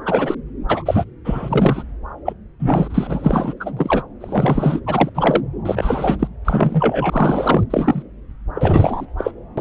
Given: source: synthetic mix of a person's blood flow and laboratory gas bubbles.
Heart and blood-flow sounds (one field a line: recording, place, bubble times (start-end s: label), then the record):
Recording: Doppler ultrasound of blood flow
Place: subclavian vein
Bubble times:
0.05-0.34 s: bubbles
0.68-1.04 s: bubbles
1.24-1.83 s: bubbles
2.26-2.34 s: bubbles
2.60-3.54 s: bubbles
3.60-3.72 s: bubbles
3.77-4.02 s: bubbles
4.20-4.81 s: bubbles
4.86-5.09 s: bubbles
5.14-5.41 s: bubbles
5.65-6.27 s: bubbles
6.44-7.63 s: bubbles
7.70-8.03 s: bubbles
8.54-9.06 s: bubbles
9.18-9.32 s: bubbles
9.57-9.61 s: bubbles
From the record:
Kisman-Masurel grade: 243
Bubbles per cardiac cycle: several, 3 to 8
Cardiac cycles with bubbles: 100%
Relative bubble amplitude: loud (0.450 to 0.775)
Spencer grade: 3 (all of the cardiac periods contain showers or single bubble signals, but not dominating or overriding the cardiac motion signals)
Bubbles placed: anywhere in the cardiac cycle